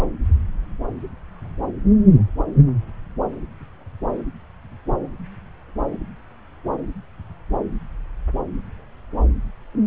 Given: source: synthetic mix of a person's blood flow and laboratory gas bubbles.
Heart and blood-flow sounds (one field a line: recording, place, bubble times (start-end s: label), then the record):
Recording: Doppler ultrasound of blood flow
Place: subclavian vein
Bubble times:
0.00-0.03 s: bubbles
From the record:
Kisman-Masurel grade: 211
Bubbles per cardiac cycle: several, 3 to 8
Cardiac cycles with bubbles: 1 to 10%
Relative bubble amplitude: barely perceptible (0.100 to 0.250)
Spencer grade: 1 (occasional bubble signal discernible with the cardiac motion signal, with majority of cardiac periods free of bubbles)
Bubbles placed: anywhere in the cardiac cycle